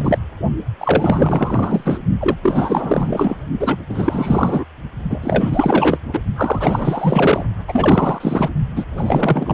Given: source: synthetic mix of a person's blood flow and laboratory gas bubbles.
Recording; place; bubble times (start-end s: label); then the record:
Doppler ultrasound of blood flow; precordium
0.00-0.18 s: bubbles
0.79-2.00 s: bubbles
2.20-2.37 s: bubbles
2.42-3.43 s: bubbles
3.60-3.78 s: bubbles
3.89-4.65 s: bubbles
5.09-5.98 s: bubbles
6.12-6.20 s: bubbles
6.35-7.44 s: bubbles
7.68-8.49 s: bubbles
8.76-8.86 s: bubbles
8.97-9.54 s: bubbles
From the record:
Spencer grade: 4 (maximum detectable bubble signal sounding continuously throughout systole and diastole of every cardiac period, and overriding the amplitude of the normal cardiac signals); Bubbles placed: only in the low amplitude regions of the cardiac cycle